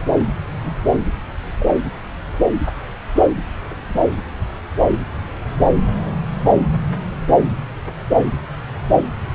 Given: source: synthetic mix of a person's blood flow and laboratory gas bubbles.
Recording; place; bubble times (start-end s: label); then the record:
Doppler ultrasound of blood flow; subclavian vein
0.62-0.74 s: bubbles
1.60-1.66 s: bubbles
From the record:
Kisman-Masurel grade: 111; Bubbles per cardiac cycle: 1 to 2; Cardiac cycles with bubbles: 1 to 10%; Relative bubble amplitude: barely perceptible (0.100 to 0.250); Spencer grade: 1 (occasional bubble signal discernible with the cardiac motion signal, with majority of cardiac periods free of bubbles); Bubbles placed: anywhere in the cardiac cycle